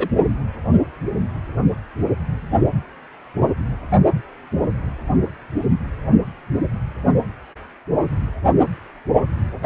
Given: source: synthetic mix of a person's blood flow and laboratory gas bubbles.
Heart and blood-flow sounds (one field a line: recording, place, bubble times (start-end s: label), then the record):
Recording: Doppler ultrasound of blood flow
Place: precordium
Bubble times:
0.00-0.09 s: bubbles
From the record:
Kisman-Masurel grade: 222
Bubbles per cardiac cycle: several, 3 to 8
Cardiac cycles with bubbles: 10 to 50%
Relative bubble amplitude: moderate (0.250 to 0.450)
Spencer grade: 2 (many but less than half of the cardiac periods contain bubble signals, singularly or in groups)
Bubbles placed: anywhere in the cardiac cycle